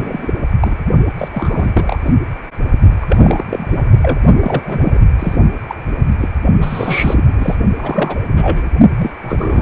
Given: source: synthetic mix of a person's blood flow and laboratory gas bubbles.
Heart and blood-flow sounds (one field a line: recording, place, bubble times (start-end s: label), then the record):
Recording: Doppler ultrasound of blood flow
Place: precordium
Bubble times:
0.00-0.37 s: bubbles
0.60-0.76 s: bubbles
1.18-1.28 s: bubbles
1.32-1.72 s: bubbles
1.74-1.96 s: bubbles
2.06-2.14 s: bubbles
3.01-3.44 s: bubbles
3.50-3.90 s: bubbles
4.02-4.19 s: bubbles
4.40-5.00 s: bubbles
5.19-5.36 s: bubbles
5.68-5.75 s: bubbles
6.19-6.29 s: bubbles
6.61-7.56 s: bubbles
7.76-8.24 s: bubbles
8.32-8.69 s: bubbles
8.97-9.11 s: bubbles
9.21-9.62 s: bubbles
From the record:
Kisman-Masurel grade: 342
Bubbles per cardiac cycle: rolling drumbeat, 9 or more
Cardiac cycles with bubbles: 100%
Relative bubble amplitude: moderate (0.250 to 0.450)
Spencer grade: 3 (all of the cardiac periods contain showers or single bubble signals, but not dominating or overriding the cardiac motion signals)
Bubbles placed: only in the low amplitude regions of the cardiac cycle